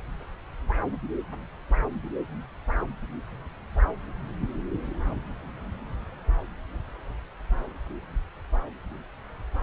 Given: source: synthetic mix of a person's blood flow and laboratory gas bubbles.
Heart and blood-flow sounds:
Doppler ultrasound of blood flow; subclavian vein
no bubbles
From the record:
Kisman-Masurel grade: 000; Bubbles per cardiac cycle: 0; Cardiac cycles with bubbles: 0%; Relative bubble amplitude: no bubbles discernible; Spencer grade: 0 (complete lack of bubble signals)

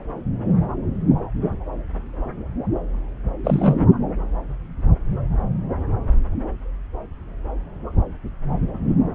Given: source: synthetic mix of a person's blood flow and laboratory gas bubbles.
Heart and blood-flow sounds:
Doppler ultrasound of blood flow; subclavian vein
3.44-3.75 s: bubbles
From the record:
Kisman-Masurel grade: 123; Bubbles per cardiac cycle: 1 to 2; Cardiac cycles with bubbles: 10 to 50%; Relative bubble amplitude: loud (0.450 to 0.775); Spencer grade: 2 (many but less than half of the cardiac periods contain bubble signals, singularly or in groups); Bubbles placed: anywhere in the cardiac cycle

